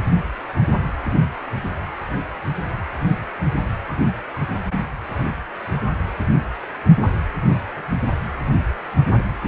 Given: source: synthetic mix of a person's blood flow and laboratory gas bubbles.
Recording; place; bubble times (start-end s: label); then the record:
Doppler ultrasound of blood flow; precordium
no bubbles
From the record:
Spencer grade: 0 (complete lack of bubble signals)